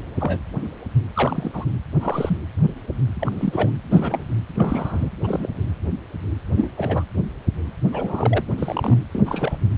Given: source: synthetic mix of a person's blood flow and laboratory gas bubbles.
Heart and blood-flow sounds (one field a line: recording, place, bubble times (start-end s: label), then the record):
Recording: Doppler ultrasound of blood flow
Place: precordium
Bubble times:
0.20-0.41 s: bubbles
1.14-1.65 s: bubbles
2.00-2.37 s: bubbles
3.19-3.71 s: bubbles
3.88-4.21 s: bubbles
4.55-5.09 s: bubbles
5.23-5.50 s: bubbles
6.57-6.70 s: bubbles
6.78-7.04 s: bubbles
7.92-8.44 s: bubbles
8.58-8.99 s: bubbles
9.12-9.22 s: bubbles
9.26-9.59 s: bubbles
From the record:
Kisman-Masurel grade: 232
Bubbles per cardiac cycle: several, 3 to 8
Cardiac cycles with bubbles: 50 to 99%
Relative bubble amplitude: moderate (0.250 to 0.450)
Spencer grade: 3 (all of the cardiac periods contain showers or single bubble signals, but not dominating or overriding the cardiac motion signals)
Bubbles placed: anywhere in the cardiac cycle